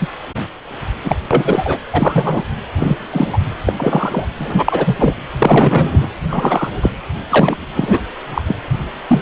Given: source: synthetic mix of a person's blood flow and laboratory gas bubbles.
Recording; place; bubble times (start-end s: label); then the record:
Doppler ultrasound of blood flow; precordium
0.00-0.08 s: bubbles
1.04-1.16 s: bubbles
1.31-1.79 s: bubbles
1.92-2.44 s: bubbles
2.76-2.98 s: bubbles
3.11-3.38 s: bubbles
3.65-3.73 s: bubbles
3.77-4.25 s: bubbles
4.39-5.14 s: bubbles
5.40-6.07 s: bubbles
6.28-6.73 s: bubbles
6.82-6.91 s: bubbles
7.29-7.67 s: bubbles
7.75-8.00 s: bubbles
8.34-8.42 s: bubbles
8.47-8.56 s: bubbles
9.07-9.21 s: bubbles
From the record:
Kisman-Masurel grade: 243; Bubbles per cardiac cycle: several, 3 to 8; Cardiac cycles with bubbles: 100%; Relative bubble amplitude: loud (0.450 to 0.775); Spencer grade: 3 (all of the cardiac periods contain showers or single bubble signals, but not dominating or overriding the cardiac motion signals); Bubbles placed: anywhere in the cardiac cycle